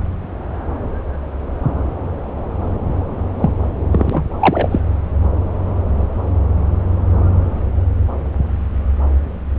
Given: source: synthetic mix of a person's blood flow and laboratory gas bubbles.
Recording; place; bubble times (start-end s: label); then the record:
Doppler ultrasound of blood flow; subclavian vein
3.38-3.52 s: bubbles
3.92-4.23 s: bubbles
4.39-4.79 s: bubbles
From the record:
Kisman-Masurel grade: 213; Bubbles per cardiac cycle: several, 3 to 8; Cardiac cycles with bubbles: 1 to 10%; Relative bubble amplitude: loud (0.450 to 0.775); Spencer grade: 1 (occasional bubble signal discernible with the cardiac motion signal, with majority of cardiac periods free of bubbles); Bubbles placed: anywhere in the cardiac cycle